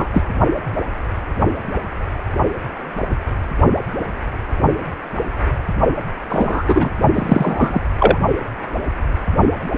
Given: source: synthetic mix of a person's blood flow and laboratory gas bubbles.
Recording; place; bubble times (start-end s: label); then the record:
Doppler ultrasound of blood flow; precordium
0.00-0.06 s: bubbles
0.13-0.25 s: bubbles
6.29-6.63 s: bubbles
6.68-6.90 s: bubbles
7.14-7.80 s: bubbles
7.99-8.18 s: bubbles
From the record:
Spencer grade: 2 (many but less than half of the cardiac periods contain bubble signals, singularly or in groups); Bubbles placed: only in the low amplitude regions of the cardiac cycle